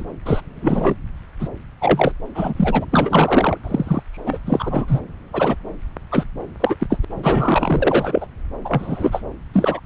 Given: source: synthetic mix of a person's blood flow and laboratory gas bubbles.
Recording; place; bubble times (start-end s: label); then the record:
Doppler ultrasound of blood flow; subclavian vein
0.00-0.03 s: bubbles
0.25-0.41 s: bubbles
0.62-0.95 s: bubbles
1.39-1.48 s: bubbles
1.80-2.12 s: bubbles
2.34-2.53 s: bubbles
2.56-2.85 s: bubbles
2.91-3.57 s: bubbles
3.63-4.03 s: bubbles
4.12-4.40 s: bubbles
4.46-4.85 s: bubbles
4.88-5.01 s: bubbles
5.33-5.56 s: bubbles
6.12-6.25 s: bubbles
6.60-6.76 s: bubbles
6.79-6.98 s: bubbles
7.03-7.05 s: bubbles
7.10-8.27 s: bubbles
8.64-9.21 s: bubbles
9.53-9.80 s: bubbles
From the record:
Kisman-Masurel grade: 243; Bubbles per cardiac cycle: several, 3 to 8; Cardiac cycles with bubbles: 100%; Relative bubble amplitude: loud (0.450 to 0.775); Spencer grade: 3 (all of the cardiac periods contain showers or single bubble signals, but not dominating or overriding the cardiac motion signals); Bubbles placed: anywhere in the cardiac cycle